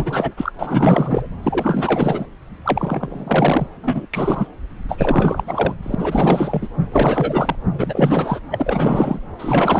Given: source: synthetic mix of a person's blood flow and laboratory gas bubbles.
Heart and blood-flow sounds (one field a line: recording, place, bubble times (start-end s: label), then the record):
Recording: Doppler ultrasound of blood flow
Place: subclavian vein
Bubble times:
0.00-0.32 s: bubbles
0.36-0.53 s: bubbles
0.59-1.27 s: bubbles
1.43-2.26 s: bubbles
2.65-3.67 s: bubbles
3.82-4.06 s: bubbles
4.13-4.47 s: bubbles
4.88-5.43 s: bubbles
5.46-5.75 s: bubbles
5.83-5.95 s: bubbles
5.99-6.68 s: bubbles
6.92-7.55 s: bubbles
7.71-8.40 s: bubbles
8.51-9.20 s: bubbles
9.39-9.80 s: bubbles
From the record:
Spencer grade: 4 (maximum detectable bubble signal sounding continuously throughout systole and diastole of every cardiac period, and overriding the amplitude of the normal cardiac signals)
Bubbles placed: anywhere in the cardiac cycle